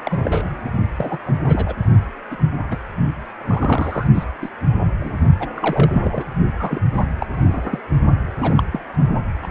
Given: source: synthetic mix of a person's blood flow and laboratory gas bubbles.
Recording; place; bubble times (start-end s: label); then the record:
Doppler ultrasound of blood flow; precordium
0.04-0.50 s: bubbles
0.96-1.18 s: bubbles
1.26-1.34 s: bubbles
1.47-1.74 s: bubbles
2.31-2.36 s: bubbles
2.71-2.77 s: bubbles
3.38-4.07 s: bubbles
4.14-4.24 s: bubbles
4.42-4.49 s: bubbles
4.99-5.12 s: bubbles
5.39-5.48 s: bubbles
5.54-6.25 s: bubbles
6.59-6.79 s: bubbles
6.93-7.04 s: bubbles
7.18-7.26 s: bubbles
7.33-7.80 s: bubbles
8.38-8.63 s: bubbles
8.72-8.79 s: bubbles
9.41-9.47 s: bubbles
From the record:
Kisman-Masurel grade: 242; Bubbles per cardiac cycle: several, 3 to 8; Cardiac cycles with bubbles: 100%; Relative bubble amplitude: moderate (0.250 to 0.450); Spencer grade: 3 (all of the cardiac periods contain showers or single bubble signals, but not dominating or overriding the cardiac motion signals); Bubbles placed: only in the low amplitude regions of the cardiac cycle